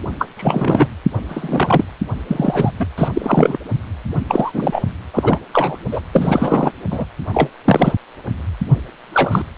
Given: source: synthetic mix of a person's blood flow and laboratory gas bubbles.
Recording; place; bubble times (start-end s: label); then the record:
Doppler ultrasound of blood flow; precordium
0.18-0.27 s: bubbles
0.36-0.88 s: bubbles
1.29-1.84 s: bubbles
2.27-2.71 s: bubbles
2.80-2.85 s: bubbles
2.98-3.08 s: bubbles
3.14-3.58 s: bubbles
4.28-4.83 s: bubbles
5.13-5.40 s: bubbles
5.53-5.77 s: bubbles
5.92-6.02 s: bubbles
6.12-6.72 s: bubbles
6.90-7.05 s: bubbles
7.33-7.50 s: bubbles
7.65-7.93 s: bubbles
9.13-9.43 s: bubbles
From the record:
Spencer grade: 3 (all of the cardiac periods contain showers or single bubble signals, but not dominating or overriding the cardiac motion signals); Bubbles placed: anywhere in the cardiac cycle